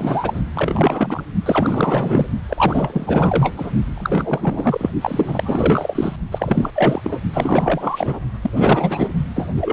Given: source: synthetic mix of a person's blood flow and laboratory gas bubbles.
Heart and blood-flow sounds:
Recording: Doppler ultrasound of blood flow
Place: precordium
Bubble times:
0.00-0.43 s: bubbles
0.54-1.23 s: bubbles
1.46-2.26 s: bubbles
2.49-3.71 s: bubbles
3.95-4.90 s: bubbles
5.01-6.16 s: bubbles
6.31-6.71 s: bubbles
6.75-7.18 s: bubbles
7.33-8.19 s: bubbles
8.43-9.10 s: bubbles
9.35-9.49 s: bubbles
9.55-9.72 s: bubbles
From the record:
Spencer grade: 4 (maximum detectable bubble signal sounding continuously throughout systole and diastole of every cardiac period, and overriding the amplitude of the normal cardiac signals)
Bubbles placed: only in the low amplitude regions of the cardiac cycle

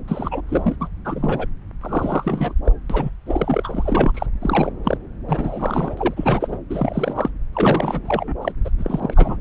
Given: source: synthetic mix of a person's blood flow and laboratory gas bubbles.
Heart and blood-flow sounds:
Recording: Doppler ultrasound of blood flow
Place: subclavian vein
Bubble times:
0.08-0.41 s: bubbles
0.49-0.76 s: bubbles
0.81-0.89 s: bubbles
1.05-1.47 s: bubbles
1.81-2.54 s: bubbles
2.65-2.72 s: bubbles
2.90-3.10 s: bubbles
3.26-4.27 s: bubbles
4.42-4.72 s: bubbles
4.83-4.98 s: bubbles
5.28-6.60 s: bubbles
6.70-7.30 s: bubbles
7.53-8.33 s: bubbles
8.41-8.52 s: bubbles
8.64-8.70 s: bubbles
8.78-9.40 s: bubbles
From the record:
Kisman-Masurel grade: 342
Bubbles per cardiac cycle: rolling drumbeat, 9 or more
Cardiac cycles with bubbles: 100%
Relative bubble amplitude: moderate (0.250 to 0.450)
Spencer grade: 3 (all of the cardiac periods contain showers or single bubble signals, but not dominating or overriding the cardiac motion signals)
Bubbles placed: anywhere in the cardiac cycle

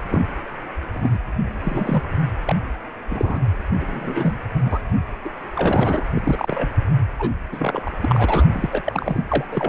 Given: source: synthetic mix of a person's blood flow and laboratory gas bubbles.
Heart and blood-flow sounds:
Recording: Doppler ultrasound of blood flow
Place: precordium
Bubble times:
0.09-0.21 s: bubbles
0.94-1.19 s: bubbles
1.61-2.07 s: bubbles
2.46-2.56 s: bubbles
3.10-3.38 s: bubbles
3.80-4.38 s: bubbles
4.64-4.79 s: bubbles
5.24-5.29 s: bubbles
5.56-6.04 s: bubbles
6.15-6.21 s: bubbles
6.23-6.69 s: bubbles
7.19-7.31 s: bubbles
7.52-7.91 s: bubbles
8.01-8.46 s: bubbles
8.52-8.70 s: bubbles
8.72-8.82 s: bubbles
8.84-9.24 s: bubbles
9.29-9.45 s: bubbles
9.52-9.69 s: bubbles
From the record:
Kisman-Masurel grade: 232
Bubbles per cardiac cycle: several, 3 to 8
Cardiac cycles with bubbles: 50 to 99%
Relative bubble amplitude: moderate (0.250 to 0.450)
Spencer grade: 3 (all of the cardiac periods contain showers or single bubble signals, but not dominating or overriding the cardiac motion signals)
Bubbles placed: anywhere in the cardiac cycle

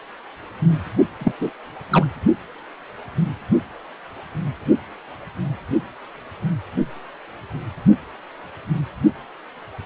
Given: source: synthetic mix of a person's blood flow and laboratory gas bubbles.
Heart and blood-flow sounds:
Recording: Doppler ultrasound of blood flow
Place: precordium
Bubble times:
1.19-1.32 s: bubbles
1.40-1.50 s: bubbles
1.92-2.06 s: bubbles
From the record:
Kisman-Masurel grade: 212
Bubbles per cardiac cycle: several, 3 to 8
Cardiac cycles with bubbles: 1 to 10%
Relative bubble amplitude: moderate (0.250 to 0.450)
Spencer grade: 1 (occasional bubble signal discernible with the cardiac motion signal, with majority of cardiac periods free of bubbles)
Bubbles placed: only in the low amplitude regions of the cardiac cycle

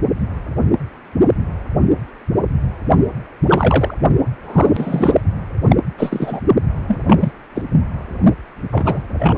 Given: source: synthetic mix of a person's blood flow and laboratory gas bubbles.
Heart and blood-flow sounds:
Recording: Doppler ultrasound of blood flow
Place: precordium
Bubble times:
3.47-3.94 s: bubbles
4.42-5.22 s: bubbles
5.69-5.76 s: bubbles
5.97-6.41 s: bubbles
6.88-7.01 s: bubbles
7.07-7.33 s: bubbles
7.54-7.63 s: bubbles
8.71-9.02 s: bubbles
9.19-9.37 s: bubbles
From the record:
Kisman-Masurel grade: 223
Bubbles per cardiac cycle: several, 3 to 8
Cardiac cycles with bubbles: 10 to 50%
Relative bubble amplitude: loud (0.450 to 0.775)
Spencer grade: 2 (many but less than half of the cardiac periods contain bubble signals, singularly or in groups)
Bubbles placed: only in the low amplitude regions of the cardiac cycle

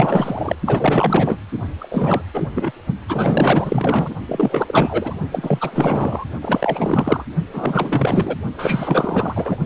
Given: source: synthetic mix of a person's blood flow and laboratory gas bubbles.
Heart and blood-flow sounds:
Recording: Doppler ultrasound of blood flow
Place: precordium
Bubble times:
0.00-0.55 s: bubbles
0.65-1.37 s: bubbles
1.78-2.22 s: bubbles
2.33-2.49 s: bubbles
2.54-2.72 s: bubbles
3.08-4.15 s: bubbles
4.26-5.17 s: bubbles
5.31-6.25 s: bubbles
6.42-7.24 s: bubbles
7.52-8.37 s: bubbles
8.58-9.57 s: bubbles
From the record:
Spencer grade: 4 (maximum detectable bubble signal sounding continuously throughout systole and diastole of every cardiac period, and overriding the amplitude of the normal cardiac signals)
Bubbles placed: only in the low amplitude regions of the cardiac cycle

